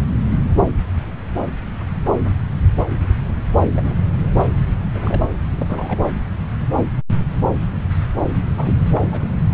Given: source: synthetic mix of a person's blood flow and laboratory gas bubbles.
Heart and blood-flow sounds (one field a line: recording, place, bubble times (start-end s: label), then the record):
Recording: Doppler ultrasound of blood flow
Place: subclavian vein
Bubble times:
3.73-3.95 s: bubbles
4.92-5.23 s: bubbles
5.58-6.05 s: bubbles
8.55-8.75 s: bubbles
8.93-9.01 s: bubbles
9.05-9.31 s: bubbles
9.51-9.54 s: bubbles
From the record:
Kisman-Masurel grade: 221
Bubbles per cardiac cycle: several, 3 to 8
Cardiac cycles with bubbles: 10 to 50%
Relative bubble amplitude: barely perceptible (0.100 to 0.250)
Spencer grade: 2 (many but less than half of the cardiac periods contain bubble signals, singularly or in groups)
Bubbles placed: anywhere in the cardiac cycle